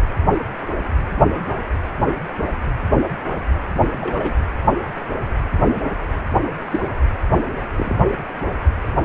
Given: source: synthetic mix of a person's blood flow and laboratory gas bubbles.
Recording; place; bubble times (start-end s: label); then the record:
Doppler ultrasound of blood flow; precordium
3.98-4.33 s: bubbles
6.71-6.81 s: bubbles
7.78-7.98 s: bubbles
From the record:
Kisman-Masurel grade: 122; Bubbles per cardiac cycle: 1 to 2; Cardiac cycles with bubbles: 10 to 50%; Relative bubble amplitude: moderate (0.250 to 0.450); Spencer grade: 2 (many but less than half of the cardiac periods contain bubble signals, singularly or in groups); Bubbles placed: anywhere in the cardiac cycle